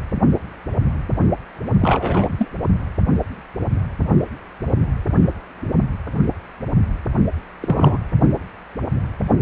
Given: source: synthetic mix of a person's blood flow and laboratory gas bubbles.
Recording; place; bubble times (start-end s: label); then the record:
Doppler ultrasound of blood flow; precordium
1.81-2.48 s: bubbles
7.61-7.98 s: bubbles
From the record:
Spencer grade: 2 (many but less than half of the cardiac periods contain bubble signals, singularly or in groups); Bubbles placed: only in the low amplitude regions of the cardiac cycle